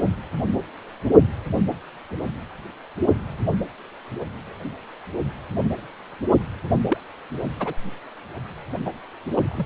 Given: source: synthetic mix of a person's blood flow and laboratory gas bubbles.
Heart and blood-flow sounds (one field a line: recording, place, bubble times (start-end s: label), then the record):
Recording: Doppler ultrasound of blood flow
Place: precordium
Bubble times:
6.88-6.98 s: bubbles
7.59-7.75 s: bubbles
8.85-8.91 s: bubbles
9.34-9.66 s: bubbles
From the record:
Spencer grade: 2 (many but less than half of the cardiac periods contain bubble signals, singularly or in groups)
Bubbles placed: anywhere in the cardiac cycle